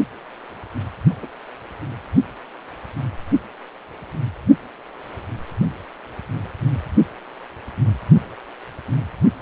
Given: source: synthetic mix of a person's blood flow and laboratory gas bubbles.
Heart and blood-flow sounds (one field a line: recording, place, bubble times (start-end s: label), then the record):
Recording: Doppler ultrasound of blood flow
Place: precordium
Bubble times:
1.23-1.27 s: bubbles
From the record:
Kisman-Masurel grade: 111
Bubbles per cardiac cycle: 1 to 2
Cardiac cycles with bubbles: 1 to 10%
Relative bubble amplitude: barely perceptible (0.100 to 0.250)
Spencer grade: 1 (occasional bubble signal discernible with the cardiac motion signal, with majority of cardiac periods free of bubbles)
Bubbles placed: only in the low amplitude regions of the cardiac cycle